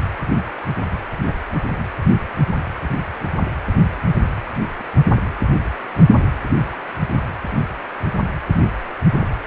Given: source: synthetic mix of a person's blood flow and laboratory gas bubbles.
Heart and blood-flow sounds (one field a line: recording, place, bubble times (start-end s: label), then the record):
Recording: Doppler ultrasound of blood flow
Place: precordium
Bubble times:
1.26-1.34 s: bubbles
1.50-1.60 s: bubbles
9.21-9.27 s: bubbles
From the record:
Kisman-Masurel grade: 121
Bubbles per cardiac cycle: 1 to 2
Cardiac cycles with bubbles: 10 to 50%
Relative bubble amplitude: barely perceptible (0.100 to 0.250)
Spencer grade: 2 (many but less than half of the cardiac periods contain bubble signals, singularly or in groups)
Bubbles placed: anywhere in the cardiac cycle